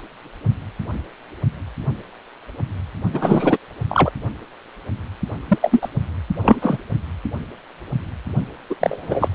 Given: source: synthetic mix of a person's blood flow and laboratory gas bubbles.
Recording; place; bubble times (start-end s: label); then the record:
Doppler ultrasound of blood flow; precordium
3.13-3.58 s: bubbles
3.89-4.10 s: bubbles
5.48-5.58 s: bubbles
5.61-5.89 s: bubbles
6.42-6.79 s: bubbles
8.70-8.75 s: bubbles
8.80-9.28 s: bubbles
From the record:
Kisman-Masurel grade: 223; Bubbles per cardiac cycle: several, 3 to 8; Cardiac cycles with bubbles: 10 to 50%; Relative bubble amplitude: loud (0.450 to 0.775); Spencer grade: 2 (many but less than half of the cardiac periods contain bubble signals, singularly or in groups); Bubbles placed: only in the low amplitude regions of the cardiac cycle